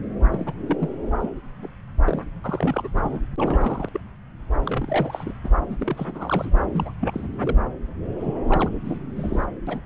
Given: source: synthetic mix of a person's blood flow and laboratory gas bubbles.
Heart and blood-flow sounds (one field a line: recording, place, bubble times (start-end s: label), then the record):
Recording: Doppler ultrasound of blood flow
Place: subclavian vein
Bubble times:
0.32-0.53 s: bubbles
0.61-0.76 s: bubbles
0.80-0.89 s: bubbles
1.21-1.29 s: bubbles
1.62-1.68 s: bubbles
2.04-2.24 s: bubbles
2.44-2.89 s: bubbles
2.96-3.21 s: bubbles
3.38-3.89 s: bubbles
3.93-4.00 s: bubbles
4.65-5.33 s: bubbles
5.44-5.49 s: bubbles
5.69-6.67 s: bubbles
6.74-6.92 s: bubbles
7.00-7.28 s: bubbles
7.40-7.58 s: bubbles
8.19-8.34 s: bubbles
8.48-8.69 s: bubbles
8.84-9.00 s: bubbles
9.16-9.47 s: bubbles
9.66-9.82 s: bubbles
From the record:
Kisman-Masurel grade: 242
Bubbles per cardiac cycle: several, 3 to 8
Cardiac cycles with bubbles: 100%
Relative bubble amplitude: moderate (0.250 to 0.450)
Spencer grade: 3 (all of the cardiac periods contain showers or single bubble signals, but not dominating or overriding the cardiac motion signals)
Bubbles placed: anywhere in the cardiac cycle